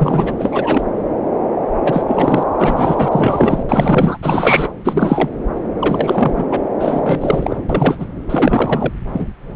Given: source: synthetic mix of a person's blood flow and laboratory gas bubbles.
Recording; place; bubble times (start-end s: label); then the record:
Doppler ultrasound of blood flow; subclavian vein
0.00-0.34 s: bubbles
0.38-0.82 s: bubbles
1.83-2.04 s: bubbles
2.08-2.43 s: bubbles
2.58-3.08 s: bubbles
3.11-3.63 s: bubbles
3.69-4.17 s: bubbles
4.22-4.68 s: bubbles
4.84-5.29 s: bubbles
5.80-6.45 s: bubbles
6.50-6.61 s: bubbles
6.79-7.56 s: bubbles
7.69-8.06 s: bubbles
8.29-8.92 s: bubbles
9.13-9.26 s: bubbles
From the record:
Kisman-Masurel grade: 333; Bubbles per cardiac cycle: rolling drumbeat, 9 or more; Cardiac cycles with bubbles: 50 to 99%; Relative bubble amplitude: loud (0.450 to 0.775); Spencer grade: 3 (all of the cardiac periods contain showers or single bubble signals, but not dominating or overriding the cardiac motion signals); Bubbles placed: anywhere in the cardiac cycle